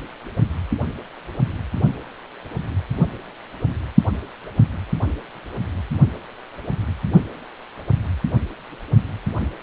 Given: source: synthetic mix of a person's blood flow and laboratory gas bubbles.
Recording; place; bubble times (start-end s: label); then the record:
Doppler ultrasound of blood flow; precordium
no bubbles
From the record:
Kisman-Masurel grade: 000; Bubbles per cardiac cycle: 0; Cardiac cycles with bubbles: 0%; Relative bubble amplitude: no bubbles discernible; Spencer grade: 0 (complete lack of bubble signals)